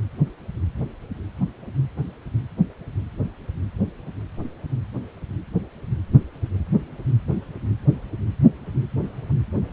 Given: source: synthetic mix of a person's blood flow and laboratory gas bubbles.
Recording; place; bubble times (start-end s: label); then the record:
Doppler ultrasound of blood flow; precordium
no bubbles
From the record:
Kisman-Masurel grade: 000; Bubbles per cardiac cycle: 0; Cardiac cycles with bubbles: 0%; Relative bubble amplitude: no bubbles discernible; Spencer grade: 0 (complete lack of bubble signals)